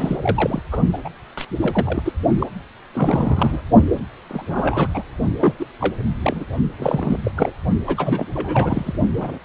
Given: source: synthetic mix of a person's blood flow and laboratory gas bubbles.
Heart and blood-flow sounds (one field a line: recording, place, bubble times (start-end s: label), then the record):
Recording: Doppler ultrasound of blood flow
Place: precordium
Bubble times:
0.00-0.62 s: bubbles
0.71-0.82 s: bubbles
0.92-0.98 s: bubbles
1.04-1.09 s: bubbles
1.37-1.45 s: bubbles
1.62-2.02 s: bubbles
2.04-2.13 s: bubbles
2.39-2.47 s: bubbles
2.94-3.62 s: bubbles
3.92-3.99 s: bubbles
4.29-4.88 s: bubbles
4.94-5.04 s: bubbles
5.39-5.54 s: bubbles
5.59-5.66 s: bubbles
5.80-5.96 s: bubbles
6.22-6.46 s: bubbles
6.79-7.31 s: bubbles
7.37-7.54 s: bubbles
7.86-8.26 s: bubbles
8.34-8.97 s: bubbles
9.16-9.38 s: bubbles
From the record:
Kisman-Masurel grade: 342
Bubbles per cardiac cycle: rolling drumbeat, 9 or more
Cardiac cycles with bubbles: 100%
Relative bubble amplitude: moderate (0.250 to 0.450)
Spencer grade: 3 (all of the cardiac periods contain showers or single bubble signals, but not dominating or overriding the cardiac motion signals)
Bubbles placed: only in the low amplitude regions of the cardiac cycle